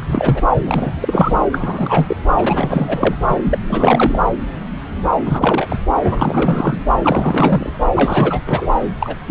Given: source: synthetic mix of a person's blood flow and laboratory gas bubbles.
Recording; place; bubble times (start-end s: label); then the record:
Doppler ultrasound of blood flow; subclavian vein
0.02-0.04 s: bubbles
0.08-0.42 s: bubbles
0.66-1.34 s: bubbles
1.52-2.16 s: bubbles
2.37-3.15 s: bubbles
3.27-3.38 s: bubbles
3.43-3.58 s: bubbles
3.67-4.19 s: bubbles
5.25-5.76 s: bubbles
6.04-6.79 s: bubbles
6.99-7.73 s: bubbles
7.95-8.42 s: bubbles
8.46-8.67 s: bubbles
9.00-9.16 s: bubbles
9.26-9.31 s: bubbles
From the record:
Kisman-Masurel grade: 333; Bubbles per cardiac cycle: rolling drumbeat, 9 or more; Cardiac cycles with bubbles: 50 to 99%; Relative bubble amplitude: loud (0.450 to 0.775); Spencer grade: 3 (all of the cardiac periods contain showers or single bubble signals, but not dominating or overriding the cardiac motion signals); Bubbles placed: anywhere in the cardiac cycle